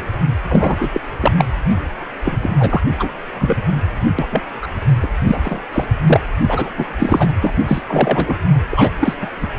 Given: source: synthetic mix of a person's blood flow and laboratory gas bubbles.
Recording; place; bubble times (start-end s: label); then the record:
Doppler ultrasound of blood flow; precordium
0.48-1.00 s: bubbles
1.20-1.32 s: bubbles
1.38-1.45 s: bubbles
2.25-2.38 s: bubbles
2.42-2.51 s: bubbles
2.58-2.83 s: bubbles
2.98-3.09 s: bubbles
3.35-3.62 s: bubbles
4.19-4.28 s: bubbles
4.31-4.42 s: bubbles
4.62-4.67 s: bubbles
5.03-5.08 s: bubbles
5.25-5.39 s: bubbles
5.43-5.59 s: bubbles
5.73-5.86 s: bubbles
6.07-6.21 s: bubbles
6.41-6.71 s: bubbles
6.77-6.86 s: bubbles
6.99-7.32 s: bubbles
7.41-7.54 s: bubbles
7.67-7.82 s: bubbles
7.87-8.35 s: bubbles
8.71-8.91 s: bubbles
8.99-9.16 s: bubbles
9.21-9.29 s: bubbles
9.41-9.47 s: bubbles
From the record:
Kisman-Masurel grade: 243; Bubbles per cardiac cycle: several, 3 to 8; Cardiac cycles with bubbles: 100%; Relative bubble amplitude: loud (0.450 to 0.775); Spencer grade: 3 (all of the cardiac periods contain showers or single bubble signals, but not dominating or overriding the cardiac motion signals); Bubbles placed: anywhere in the cardiac cycle